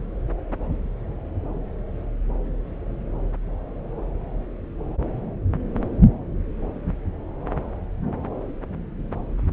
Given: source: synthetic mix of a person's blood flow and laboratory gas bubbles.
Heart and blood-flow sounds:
Doppler ultrasound of blood flow; subclavian vein
no bubbles
From the record:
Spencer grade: 0 (complete lack of bubble signals)

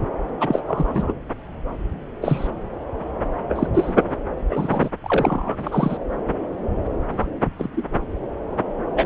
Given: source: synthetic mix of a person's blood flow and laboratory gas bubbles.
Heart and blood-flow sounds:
Doppler ultrasound of blood flow; subclavian vein
0.40-0.61 s: bubbles
0.68-1.14 s: bubbles
2.21-2.47 s: bubbles
3.48-3.67 s: bubbles
3.74-3.93 s: bubbles
4.49-4.89 s: bubbles
5.04-5.98 s: bubbles
7.12-7.28 s: bubbles
7.58-7.69 s: bubbles
7.76-7.83 s: bubbles
8.96-9.06 s: bubbles
From the record:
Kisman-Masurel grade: 232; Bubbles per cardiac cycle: several, 3 to 8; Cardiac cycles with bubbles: 50 to 99%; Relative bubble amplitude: moderate (0.250 to 0.450); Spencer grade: 3 (all of the cardiac periods contain showers or single bubble signals, but not dominating or overriding the cardiac motion signals); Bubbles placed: anywhere in the cardiac cycle

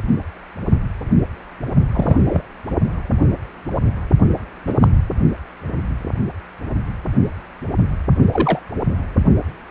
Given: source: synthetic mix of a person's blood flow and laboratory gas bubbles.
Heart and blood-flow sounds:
Doppler ultrasound of blood flow; precordium
1.92-2.17 s: bubbles
2.25-2.42 s: bubbles
4.67-4.74 s: bubbles
4.80-4.88 s: bubbles
8.31-8.59 s: bubbles
From the record:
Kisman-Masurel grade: 123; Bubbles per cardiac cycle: 1 to 2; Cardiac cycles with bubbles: 10 to 50%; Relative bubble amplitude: loud (0.450 to 0.775); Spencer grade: 2 (many but less than half of the cardiac periods contain bubble signals, singularly or in groups); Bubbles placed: only in the low amplitude regions of the cardiac cycle

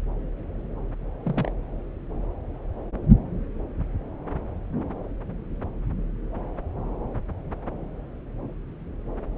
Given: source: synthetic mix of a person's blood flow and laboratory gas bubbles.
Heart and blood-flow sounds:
Doppler ultrasound of blood flow; subclavian vein
1.23-1.52 s: bubbles
From the record:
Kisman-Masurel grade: 111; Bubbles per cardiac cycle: 1 to 2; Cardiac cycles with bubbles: 1 to 10%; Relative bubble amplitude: barely perceptible (0.100 to 0.250); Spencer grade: 1 (occasional bubble signal discernible with the cardiac motion signal, with majority of cardiac periods free of bubbles); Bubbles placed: anywhere in the cardiac cycle

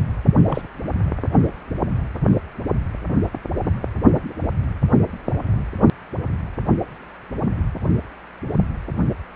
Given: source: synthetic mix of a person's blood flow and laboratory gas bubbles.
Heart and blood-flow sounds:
Doppler ultrasound of blood flow; precordium
0.46-0.67 s: bubbles
From the record:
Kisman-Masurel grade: 112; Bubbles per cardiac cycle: 1 to 2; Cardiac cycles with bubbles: 1 to 10%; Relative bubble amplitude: moderate (0.250 to 0.450); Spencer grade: 1 (occasional bubble signal discernible with the cardiac motion signal, with majority of cardiac periods free of bubbles); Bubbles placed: anywhere in the cardiac cycle

